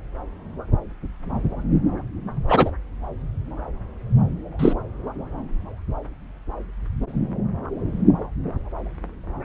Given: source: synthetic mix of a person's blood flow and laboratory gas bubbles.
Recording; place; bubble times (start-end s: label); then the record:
Doppler ultrasound of blood flow; subclavian vein
2.48-2.71 s: bubbles
4.59-4.73 s: bubbles
From the record:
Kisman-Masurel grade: 113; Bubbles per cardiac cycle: 1 to 2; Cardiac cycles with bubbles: 1 to 10%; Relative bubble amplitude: loud (0.450 to 0.775); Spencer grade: 1 (occasional bubble signal discernible with the cardiac motion signal, with majority of cardiac periods free of bubbles); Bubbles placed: anywhere in the cardiac cycle